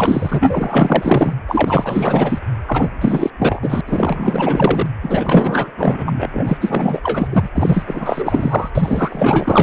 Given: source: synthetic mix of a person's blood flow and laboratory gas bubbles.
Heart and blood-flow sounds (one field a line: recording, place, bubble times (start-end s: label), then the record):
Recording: Doppler ultrasound of blood flow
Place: precordium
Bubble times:
0.00-1.33 s: bubbles
1.47-2.39 s: bubbles
2.67-2.89 s: bubbles
3.01-3.30 s: bubbles
3.39-3.59 s: bubbles
3.61-3.81 s: bubbles
3.86-4.88 s: bubbles
5.03-5.71 s: bubbles
5.78-6.30 s: bubbles
6.33-6.58 s: bubbles
6.61-7.01 s: bubbles
7.03-7.50 s: bubbles
7.55-8.70 s: bubbles
8.75-9.63 s: bubbles
From the record:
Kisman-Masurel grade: 444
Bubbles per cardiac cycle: continuous sound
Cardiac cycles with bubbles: 100%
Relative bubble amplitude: maximal (0.775 to 0.999)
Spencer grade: 4 (maximum detectable bubble signal sounding continuously throughout systole and diastole of every cardiac period, and overriding the amplitude of the normal cardiac signals)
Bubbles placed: anywhere in the cardiac cycle